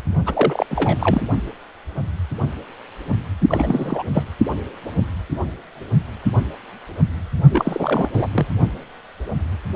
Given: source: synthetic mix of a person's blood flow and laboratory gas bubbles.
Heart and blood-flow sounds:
Doppler ultrasound of blood flow; precordium
0.26-0.66 s: bubbles
0.70-1.21 s: bubbles
3.49-4.03 s: bubbles
4.14-4.24 s: bubbles
7.50-8.08 s: bubbles
8.13-8.27 s: bubbles
8.34-8.46 s: bubbles
From the record:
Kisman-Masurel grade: 332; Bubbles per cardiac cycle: rolling drumbeat, 9 or more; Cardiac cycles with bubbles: 50 to 99%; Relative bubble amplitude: moderate (0.250 to 0.450); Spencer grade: 3 (all of the cardiac periods contain showers or single bubble signals, but not dominating or overriding the cardiac motion signals); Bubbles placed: only in the low amplitude regions of the cardiac cycle

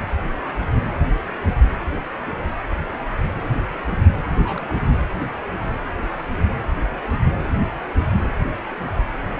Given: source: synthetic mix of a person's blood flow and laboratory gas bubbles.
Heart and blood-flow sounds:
Doppler ultrasound of blood flow; precordium
4.32-4.77 s: bubbles
4.81-4.97 s: bubbles
From the record:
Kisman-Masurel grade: 211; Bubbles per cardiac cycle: several, 3 to 8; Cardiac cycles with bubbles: 1 to 10%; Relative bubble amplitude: barely perceptible (0.100 to 0.250); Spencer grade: 1 (occasional bubble signal discernible with the cardiac motion signal, with majority of cardiac periods free of bubbles); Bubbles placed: anywhere in the cardiac cycle

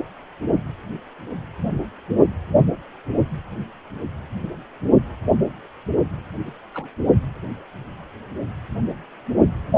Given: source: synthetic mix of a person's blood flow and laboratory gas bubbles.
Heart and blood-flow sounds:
Doppler ultrasound of blood flow; precordium
6.47-6.53 s: bubbles
6.74-6.88 s: bubbles
From the record:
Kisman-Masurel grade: 111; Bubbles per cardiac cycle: 1 to 2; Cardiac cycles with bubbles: 1 to 10%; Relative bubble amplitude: barely perceptible (0.100 to 0.250); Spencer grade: 1 (occasional bubble signal discernible with the cardiac motion signal, with majority of cardiac periods free of bubbles); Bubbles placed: only in the low amplitude regions of the cardiac cycle

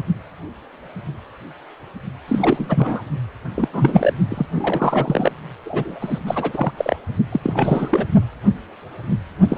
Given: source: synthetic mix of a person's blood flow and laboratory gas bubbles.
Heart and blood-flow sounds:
Doppler ultrasound of blood flow; precordium
2.27-3.03 s: bubbles
3.54-3.68 s: bubbles
3.73-4.13 s: bubbles
4.29-4.46 s: bubbles
4.55-5.32 s: bubbles
5.65-6.20 s: bubbles
6.26-6.72 s: bubbles
6.77-6.96 s: bubbles
7.32-8.05 s: bubbles
9.48-9.57 s: bubbles
From the record:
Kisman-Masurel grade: 333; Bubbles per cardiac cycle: rolling drumbeat, 9 or more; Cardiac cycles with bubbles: 50 to 99%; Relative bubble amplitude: loud (0.450 to 0.775); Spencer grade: 3 (all of the cardiac periods contain showers or single bubble signals, but not dominating or overriding the cardiac motion signals); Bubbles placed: only in the low amplitude regions of the cardiac cycle

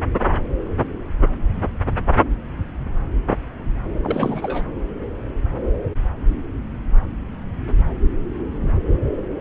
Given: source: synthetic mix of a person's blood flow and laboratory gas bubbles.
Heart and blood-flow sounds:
Doppler ultrasound of blood flow; subclavian vein
4.03-4.65 s: bubbles
From the record:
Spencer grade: 1 (occasional bubble signal discernible with the cardiac motion signal, with majority of cardiac periods free of bubbles); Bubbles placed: anywhere in the cardiac cycle

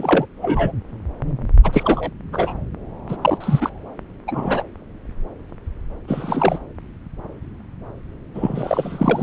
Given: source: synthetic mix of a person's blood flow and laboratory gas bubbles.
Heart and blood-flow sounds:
Doppler ultrasound of blood flow; subclavian vein
0.00-0.26 s: bubbles
0.42-0.72 s: bubbles
1.64-2.10 s: bubbles
2.32-2.53 s: bubbles
3.08-3.17 s: bubbles
3.21-3.70 s: bubbles
4.27-4.63 s: bubbles
6.07-6.58 s: bubbles
8.34-9.22 s: bubbles
From the record:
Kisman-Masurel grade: 233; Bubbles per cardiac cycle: several, 3 to 8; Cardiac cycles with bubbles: 50 to 99%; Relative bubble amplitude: loud (0.450 to 0.775); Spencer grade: 3 (all of the cardiac periods contain showers or single bubble signals, but not dominating or overriding the cardiac motion signals); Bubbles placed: anywhere in the cardiac cycle

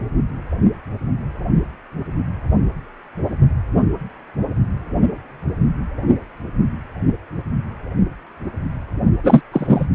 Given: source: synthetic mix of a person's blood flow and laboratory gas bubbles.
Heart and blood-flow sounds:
Doppler ultrasound of blood flow; precordium
9.23-9.41 s: bubbles
9.52-9.87 s: bubbles
From the record:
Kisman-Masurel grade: 213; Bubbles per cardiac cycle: several, 3 to 8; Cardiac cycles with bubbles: 1 to 10%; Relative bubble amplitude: loud (0.450 to 0.775); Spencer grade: 1 (occasional bubble signal discernible with the cardiac motion signal, with majority of cardiac periods free of bubbles); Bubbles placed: only in the low amplitude regions of the cardiac cycle

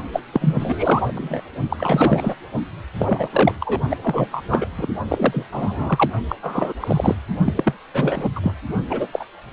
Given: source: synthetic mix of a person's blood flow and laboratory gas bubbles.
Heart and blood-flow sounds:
Doppler ultrasound of blood flow; precordium
0.12-0.20 s: bubbles
0.32-1.12 s: bubbles
1.15-1.41 s: bubbles
1.70-2.35 s: bubbles
2.99-3.28 s: bubbles
3.32-3.52 s: bubbles
3.60-3.81 s: bubbles
3.90-3.96 s: bubbles
4.04-4.27 s: bubbles
4.31-4.43 s: bubbles
4.48-4.68 s: bubbles
4.76-4.88 s: bubbles
5.07-5.46 s: bubbles
5.52-6.10 s: bubbles
6.29-6.35 s: bubbles
6.42-6.73 s: bubbles
6.80-7.16 s: bubbles
7.46-7.73 s: bubbles
7.93-8.29 s: bubbles
8.36-8.40 s: bubbles
8.42-8.54 s: bubbles
8.89-9.07 s: bubbles
9.12-9.24 s: bubbles
From the record:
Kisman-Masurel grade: 342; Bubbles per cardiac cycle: rolling drumbeat, 9 or more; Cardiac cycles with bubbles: 100%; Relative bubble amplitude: moderate (0.250 to 0.450); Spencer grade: 3 (all of the cardiac periods contain showers or single bubble signals, but not dominating or overriding the cardiac motion signals); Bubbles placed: only in the low amplitude regions of the cardiac cycle

